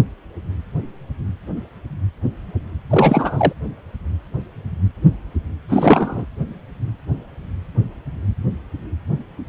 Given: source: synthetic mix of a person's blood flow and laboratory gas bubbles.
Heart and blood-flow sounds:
Doppler ultrasound of blood flow; precordium
2.90-3.52 s: bubbles
5.68-6.25 s: bubbles
From the record:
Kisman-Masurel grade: 213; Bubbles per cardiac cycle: several, 3 to 8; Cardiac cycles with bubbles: 1 to 10%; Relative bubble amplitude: loud (0.450 to 0.775); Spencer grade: 1 (occasional bubble signal discernible with the cardiac motion signal, with majority of cardiac periods free of bubbles); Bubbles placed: anywhere in the cardiac cycle

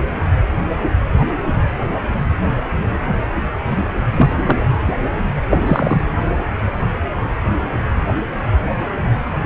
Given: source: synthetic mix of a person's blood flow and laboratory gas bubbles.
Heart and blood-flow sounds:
Doppler ultrasound of blood flow; precordium
4.15-4.33 s: bubbles
4.45-4.66 s: bubbles
4.87-4.94 s: bubbles
5.50-5.62 s: bubbles
5.66-6.08 s: bubbles
From the record:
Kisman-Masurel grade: 223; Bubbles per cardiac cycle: several, 3 to 8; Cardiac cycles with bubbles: 10 to 50%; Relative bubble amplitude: loud (0.450 to 0.775); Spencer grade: 2 (many but less than half of the cardiac periods contain bubble signals, singularly or in groups); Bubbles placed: anywhere in the cardiac cycle

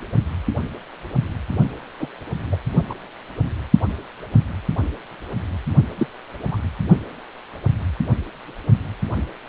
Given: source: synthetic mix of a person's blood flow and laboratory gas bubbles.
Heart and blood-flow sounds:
Doppler ultrasound of blood flow; precordium
1.99-2.07 s: bubbles
2.51-2.56 s: bubbles
2.90-2.94 s: bubbles
5.97-6.07 s: bubbles
6.51-6.58 s: bubbles
From the record:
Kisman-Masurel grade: 122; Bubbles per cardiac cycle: 1 to 2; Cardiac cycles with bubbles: 10 to 50%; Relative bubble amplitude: moderate (0.250 to 0.450); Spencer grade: 2 (many but less than half of the cardiac periods contain bubble signals, singularly or in groups); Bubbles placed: only in the low amplitude regions of the cardiac cycle

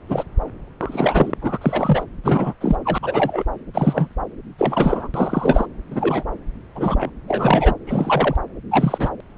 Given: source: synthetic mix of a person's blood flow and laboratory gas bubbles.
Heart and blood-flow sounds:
Doppler ultrasound of blood flow; subclavian vein
0.09-0.24 s: bubbles
0.80-1.32 s: bubbles
1.41-1.58 s: bubbles
1.61-2.04 s: bubbles
2.23-2.54 s: bubbles
2.60-2.77 s: bubbles
2.84-2.98 s: bubbles
3.02-3.44 s: bubbles
3.73-4.16 s: bubbles
4.58-5.08 s: bubbles
5.14-5.66 s: bubbles
5.90-6.24 s: bubbles
6.75-7.10 s: bubbles
7.28-7.74 s: bubbles
7.86-8.35 s: bubbles
8.70-9.09 s: bubbles
From the record:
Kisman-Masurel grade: 243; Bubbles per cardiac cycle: several, 3 to 8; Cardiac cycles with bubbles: 100%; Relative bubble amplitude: loud (0.450 to 0.775); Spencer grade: 3 (all of the cardiac periods contain showers or single bubble signals, but not dominating or overriding the cardiac motion signals); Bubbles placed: anywhere in the cardiac cycle

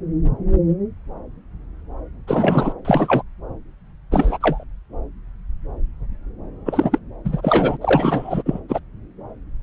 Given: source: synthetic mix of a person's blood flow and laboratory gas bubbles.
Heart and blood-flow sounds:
Doppler ultrasound of blood flow; subclavian vein
2.27-2.73 s: bubbles
2.84-3.23 s: bubbles
4.11-4.38 s: bubbles
4.41-4.65 s: bubbles
6.65-6.99 s: bubbles
7.24-7.77 s: bubbles
7.81-8.43 s: bubbles
8.46-8.59 s: bubbles
8.68-8.79 s: bubbles
From the record:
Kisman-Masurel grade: 223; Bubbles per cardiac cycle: several, 3 to 8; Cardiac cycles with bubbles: 10 to 50%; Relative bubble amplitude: loud (0.450 to 0.775); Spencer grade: 2 (many but less than half of the cardiac periods contain bubble signals, singularly or in groups); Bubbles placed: anywhere in the cardiac cycle

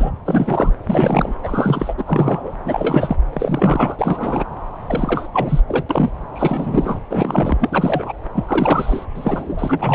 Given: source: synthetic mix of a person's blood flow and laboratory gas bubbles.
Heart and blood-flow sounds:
Doppler ultrasound of blood flow; subclavian vein
0.00-0.11 s: bubbles
0.26-0.74 s: bubbles
0.87-1.34 s: bubbles
1.43-1.95 s: bubbles
1.97-2.53 s: bubbles
2.65-3.17 s: bubbles
3.33-3.96 s: bubbles
3.98-4.44 s: bubbles
4.84-5.60 s: bubbles
5.67-5.84 s: bubbles
5.89-6.10 s: bubbles
6.33-7.00 s: bubbles
7.10-7.57 s: bubbles
7.59-8.12 s: bubbles
8.34-8.45 s: bubbles
8.48-9.06 s: bubbles
9.14-9.78 s: bubbles
9.81-9.95 s: bubbles
From the record:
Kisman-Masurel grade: 343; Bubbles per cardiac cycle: rolling drumbeat, 9 or more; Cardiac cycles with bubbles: 100%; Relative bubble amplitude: loud (0.450 to 0.775); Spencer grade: 3 (all of the cardiac periods contain showers or single bubble signals, but not dominating or overriding the cardiac motion signals); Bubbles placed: anywhere in the cardiac cycle

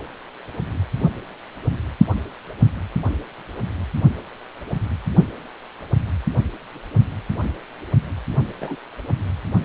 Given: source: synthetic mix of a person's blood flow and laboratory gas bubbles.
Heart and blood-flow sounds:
Doppler ultrasound of blood flow; precordium
8.61-8.76 s: bubbles
From the record:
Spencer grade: 1 (occasional bubble signal discernible with the cardiac motion signal, with majority of cardiac periods free of bubbles); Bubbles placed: only in the low amplitude regions of the cardiac cycle

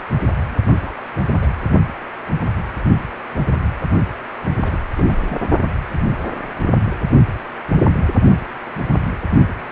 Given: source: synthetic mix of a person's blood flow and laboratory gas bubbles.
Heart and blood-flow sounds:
Doppler ultrasound of blood flow; precordium
0.65-0.72 s: bubbles
0.79-0.90 s: bubbles
1.41-1.47 s: bubbles
4.46-4.49 s: bubbles
4.58-4.79 s: bubbles
4.95-5.38 s: bubbles
From the record:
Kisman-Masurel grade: 221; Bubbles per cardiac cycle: several, 3 to 8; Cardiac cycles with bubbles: 10 to 50%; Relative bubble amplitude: barely perceptible (0.100 to 0.250); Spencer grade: 2 (many but less than half of the cardiac periods contain bubble signals, singularly or in groups); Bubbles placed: only in the low amplitude regions of the cardiac cycle

